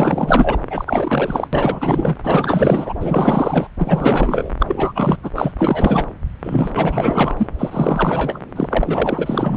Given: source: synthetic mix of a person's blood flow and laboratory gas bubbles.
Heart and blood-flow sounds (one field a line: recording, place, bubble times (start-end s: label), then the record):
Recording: Doppler ultrasound of blood flow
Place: subclavian vein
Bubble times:
0.00-0.58 s: bubbles
0.70-1.47 s: bubbles
1.52-2.16 s: bubbles
2.23-2.93 s: bubbles
3.00-3.69 s: bubbles
3.79-4.51 s: bubbles
4.59-4.92 s: bubbles
4.95-5.17 s: bubbles
5.22-5.30 s: bubbles
5.35-5.51 s: bubbles
5.58-6.07 s: bubbles
6.43-7.34 s: bubbles
7.37-7.47 s: bubbles
7.58-8.40 s: bubbles
8.55-9.57 s: bubbles
From the record:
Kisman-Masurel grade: 444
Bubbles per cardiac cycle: continuous sound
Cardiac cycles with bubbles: 100%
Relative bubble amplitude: maximal (0.775 to 0.999)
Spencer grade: 4 (maximum detectable bubble signal sounding continuously throughout systole and diastole of every cardiac period, and overriding the amplitude of the normal cardiac signals)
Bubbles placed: anywhere in the cardiac cycle